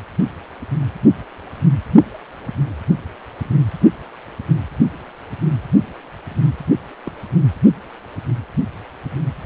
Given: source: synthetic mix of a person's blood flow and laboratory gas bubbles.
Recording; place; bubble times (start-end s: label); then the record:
Doppler ultrasound of blood flow; precordium
7.05-7.12 s: bubbles
From the record:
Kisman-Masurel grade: 111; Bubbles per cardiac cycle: 1 to 2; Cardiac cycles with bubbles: 1 to 10%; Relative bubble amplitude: barely perceptible (0.100 to 0.250); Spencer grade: 1 (occasional bubble signal discernible with the cardiac motion signal, with majority of cardiac periods free of bubbles); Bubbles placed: only in the low amplitude regions of the cardiac cycle